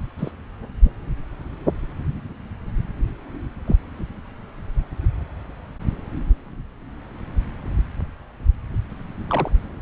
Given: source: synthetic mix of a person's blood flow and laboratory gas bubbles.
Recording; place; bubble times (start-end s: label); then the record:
Doppler ultrasound of blood flow; subclavian vein
0.18-0.32 s: bubbles
0.83-0.91 s: bubbles
3.67-3.75 s: bubbles
9.28-9.51 s: bubbles
From the record:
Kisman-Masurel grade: 121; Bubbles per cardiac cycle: 1 to 2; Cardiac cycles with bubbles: 10 to 50%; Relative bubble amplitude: barely perceptible (0.100 to 0.250); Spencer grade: 2 (many but less than half of the cardiac periods contain bubble signals, singularly or in groups); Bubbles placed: anywhere in the cardiac cycle